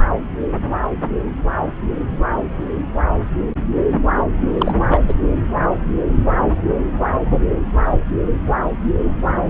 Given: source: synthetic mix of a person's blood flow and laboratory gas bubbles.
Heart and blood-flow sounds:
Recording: Doppler ultrasound of blood flow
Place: subclavian vein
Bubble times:
4.58-4.75 s: bubbles
4.89-4.99 s: bubbles
5.08-5.14 s: bubbles
From the record:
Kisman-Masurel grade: 223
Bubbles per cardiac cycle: several, 3 to 8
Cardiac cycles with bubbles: 10 to 50%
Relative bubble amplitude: loud (0.450 to 0.775)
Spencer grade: 2 (many but less than half of the cardiac periods contain bubble signals, singularly or in groups)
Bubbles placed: anywhere in the cardiac cycle

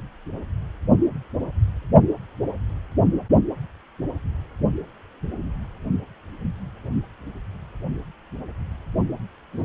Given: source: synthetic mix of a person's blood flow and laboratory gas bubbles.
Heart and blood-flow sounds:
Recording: Doppler ultrasound of blood flow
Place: precordium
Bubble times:
9.53-9.63 s: bubbles
From the record:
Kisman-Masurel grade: 111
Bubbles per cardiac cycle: 1 to 2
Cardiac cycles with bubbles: 1 to 10%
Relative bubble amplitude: barely perceptible (0.100 to 0.250)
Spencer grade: 1 (occasional bubble signal discernible with the cardiac motion signal, with majority of cardiac periods free of bubbles)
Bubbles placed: only in the low amplitude regions of the cardiac cycle

